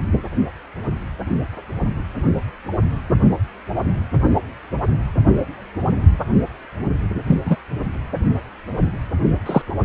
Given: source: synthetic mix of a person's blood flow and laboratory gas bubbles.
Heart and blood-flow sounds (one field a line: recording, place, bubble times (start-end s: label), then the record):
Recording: Doppler ultrasound of blood flow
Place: precordium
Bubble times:
7.27-7.37 s: bubbles
7.45-7.57 s: bubbles
9.46-9.62 s: bubbles
From the record:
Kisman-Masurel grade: 123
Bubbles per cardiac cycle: 1 to 2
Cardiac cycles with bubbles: 10 to 50%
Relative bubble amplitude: loud (0.450 to 0.775)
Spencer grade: 2 (many but less than half of the cardiac periods contain bubble signals, singularly or in groups)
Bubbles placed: anywhere in the cardiac cycle